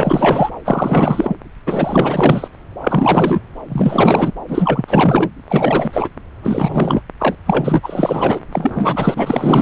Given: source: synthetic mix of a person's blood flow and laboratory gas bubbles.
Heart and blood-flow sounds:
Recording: Doppler ultrasound of blood flow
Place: subclavian vein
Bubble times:
0.00-0.50 s: bubbles
0.65-1.36 s: bubbles
1.66-2.48 s: bubbles
2.79-3.42 s: bubbles
3.69-4.32 s: bubbles
4.48-5.30 s: bubbles
5.48-6.08 s: bubbles
6.42-7.01 s: bubbles
7.19-7.36 s: bubbles
7.46-7.80 s: bubbles
7.82-8.39 s: bubbles
8.52-9.62 s: bubbles
From the record:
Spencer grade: 4 (maximum detectable bubble signal sounding continuously throughout systole and diastole of every cardiac period, and overriding the amplitude of the normal cardiac signals)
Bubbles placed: anywhere in the cardiac cycle

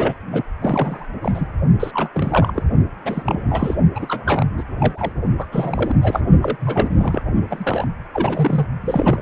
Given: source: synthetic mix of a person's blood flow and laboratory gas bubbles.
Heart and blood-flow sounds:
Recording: Doppler ultrasound of blood flow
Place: precordium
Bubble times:
0.00-0.14 s: bubbles
0.27-0.42 s: bubbles
0.61-1.07 s: bubbles
1.23-1.47 s: bubbles
1.80-1.91 s: bubbles
1.94-2.10 s: bubbles
2.14-2.63 s: bubbles
3.04-3.75 s: bubbles
3.95-4.46 s: bubbles
4.58-4.63 s: bubbles
4.79-5.12 s: bubbles
5.38-5.46 s: bubbles
5.52-5.95 s: bubbles
6.02-6.20 s: bubbles
6.42-6.57 s: bubbles
6.59-7.23 s: bubbles
7.50-7.86 s: bubbles
8.13-8.66 s: bubbles
8.81-9.22 s: bubbles
From the record:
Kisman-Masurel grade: 342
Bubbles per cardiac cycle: rolling drumbeat, 9 or more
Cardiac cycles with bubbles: 100%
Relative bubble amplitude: moderate (0.250 to 0.450)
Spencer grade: 3 (all of the cardiac periods contain showers or single bubble signals, but not dominating or overriding the cardiac motion signals)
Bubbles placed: only in the low amplitude regions of the cardiac cycle

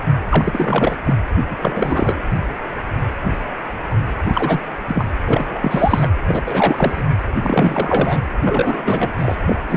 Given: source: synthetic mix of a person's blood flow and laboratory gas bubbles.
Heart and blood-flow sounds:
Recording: Doppler ultrasound of blood flow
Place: precordium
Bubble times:
0.29-0.96 s: bubbles
1.05-1.15 s: bubbles
1.50-1.56 s: bubbles
1.61-2.21 s: bubbles
4.28-4.60 s: bubbles
4.87-5.07 s: bubbles
5.26-5.46 s: bubbles
5.50-6.08 s: bubbles
6.27-6.44 s: bubbles
6.46-7.05 s: bubbles
7.43-8.19 s: bubbles
8.44-9.12 s: bubbles
9.18-9.35 s: bubbles
9.46-9.55 s: bubbles
9.70-9.77 s: bubbles
From the record:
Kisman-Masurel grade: 333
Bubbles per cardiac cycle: rolling drumbeat, 9 or more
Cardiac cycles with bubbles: 50 to 99%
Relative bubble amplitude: loud (0.450 to 0.775)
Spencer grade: 3 (all of the cardiac periods contain showers or single bubble signals, but not dominating or overriding the cardiac motion signals)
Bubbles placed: anywhere in the cardiac cycle

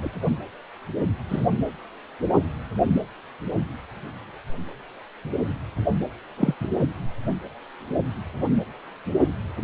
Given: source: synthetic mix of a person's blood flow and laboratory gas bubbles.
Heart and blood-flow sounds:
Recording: Doppler ultrasound of blood flow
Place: precordium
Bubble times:
0.02-0.10 s: bubbles
1.29-1.47 s: bubbles
6.37-6.54 s: bubbles
6.60-6.68 s: bubbles
From the record:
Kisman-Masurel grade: 122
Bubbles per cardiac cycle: 1 to 2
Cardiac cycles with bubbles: 10 to 50%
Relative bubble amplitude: moderate (0.250 to 0.450)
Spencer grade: 2 (many but less than half of the cardiac periods contain bubble signals, singularly or in groups)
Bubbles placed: anywhere in the cardiac cycle

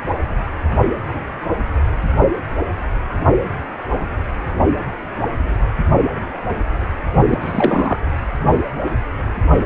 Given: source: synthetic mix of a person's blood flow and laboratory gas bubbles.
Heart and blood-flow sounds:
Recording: Doppler ultrasound of blood flow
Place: precordium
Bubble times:
7.29-7.38 s: bubbles
7.41-7.97 s: bubbles
From the record:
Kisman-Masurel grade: 212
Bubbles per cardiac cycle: several, 3 to 8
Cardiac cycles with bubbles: 1 to 10%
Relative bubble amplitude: moderate (0.250 to 0.450)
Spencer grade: 1 (occasional bubble signal discernible with the cardiac motion signal, with majority of cardiac periods free of bubbles)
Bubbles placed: only in the low amplitude regions of the cardiac cycle

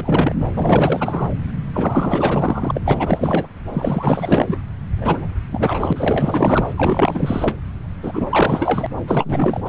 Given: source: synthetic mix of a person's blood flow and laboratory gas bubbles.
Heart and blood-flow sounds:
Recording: Doppler ultrasound of blood flow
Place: subclavian vein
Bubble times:
0.00-0.51 s: bubbles
0.54-1.34 s: bubbles
1.72-2.81 s: bubbles
2.84-3.48 s: bubbles
3.73-4.58 s: bubbles
4.97-5.29 s: bubbles
5.51-5.93 s: bubbles
5.96-6.66 s: bubbles
6.76-7.56 s: bubbles
8.03-8.26 s: bubbles
8.30-8.87 s: bubbles
9.07-9.61 s: bubbles
9.65-9.69 s: bubbles
From the record:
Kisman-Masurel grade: 444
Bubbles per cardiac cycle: continuous sound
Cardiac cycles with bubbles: 100%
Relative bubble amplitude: maximal (0.775 to 0.999)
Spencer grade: 4 (maximum detectable bubble signal sounding continuously throughout systole and diastole of every cardiac period, and overriding the amplitude of the normal cardiac signals)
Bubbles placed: anywhere in the cardiac cycle

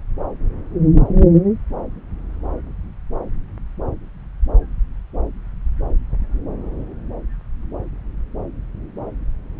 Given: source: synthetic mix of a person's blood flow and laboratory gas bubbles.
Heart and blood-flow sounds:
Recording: Doppler ultrasound of blood flow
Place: subclavian vein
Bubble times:
no bubbles
From the record:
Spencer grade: 0 (complete lack of bubble signals)

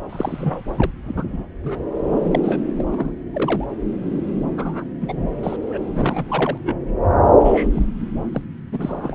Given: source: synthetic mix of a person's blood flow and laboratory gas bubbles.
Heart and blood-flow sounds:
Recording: Doppler ultrasound of blood flow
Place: subclavian vein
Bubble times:
0.09-0.61 s: bubbles
0.77-0.91 s: bubbles
1.04-1.45 s: bubbles
1.63-1.76 s: bubbles
2.31-2.40 s: bubbles
2.43-2.62 s: bubbles
2.76-3.12 s: bubbles
3.34-3.66 s: bubbles
4.58-4.84 s: bubbles
5.01-5.57 s: bubbles
5.69-5.79 s: bubbles
5.95-6.58 s: bubbles
6.64-6.76 s: bubbles
7.44-7.67 s: bubbles
7.73-7.84 s: bubbles
8.32-8.41 s: bubbles
8.71-9.15 s: bubbles
From the record:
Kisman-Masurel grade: 232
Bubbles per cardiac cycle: several, 3 to 8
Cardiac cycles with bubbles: 50 to 99%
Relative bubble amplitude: moderate (0.250 to 0.450)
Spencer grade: 3 (all of the cardiac periods contain showers or single bubble signals, but not dominating or overriding the cardiac motion signals)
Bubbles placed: anywhere in the cardiac cycle

